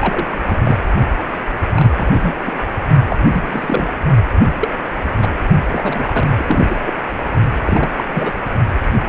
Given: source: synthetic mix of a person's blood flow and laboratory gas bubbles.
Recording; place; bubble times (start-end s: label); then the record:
Doppler ultrasound of blood flow; precordium
0.01-0.26 s: bubbles
0.31-0.40 s: bubbles
0.43-0.56 s: bubbles
0.65-0.79 s: bubbles
1.74-1.91 s: bubbles
1.96-2.33 s: bubbles
2.41-2.53 s: bubbles
3.10-3.17 s: bubbles
3.33-3.89 s: bubbles
4.34-4.54 s: bubbles
4.59-4.68 s: bubbles
5.16-5.27 s: bubbles
5.71-6.27 s: bubbles
6.37-6.77 s: bubbles
6.86-6.92 s: bubbles
7.67-7.90 s: bubbles
7.96-8.04 s: bubbles
8.08-8.32 s: bubbles
From the record:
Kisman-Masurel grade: 232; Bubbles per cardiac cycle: several, 3 to 8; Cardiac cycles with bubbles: 50 to 99%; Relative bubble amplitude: moderate (0.250 to 0.450); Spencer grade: 3 (all of the cardiac periods contain showers or single bubble signals, but not dominating or overriding the cardiac motion signals); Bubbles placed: only in the low amplitude regions of the cardiac cycle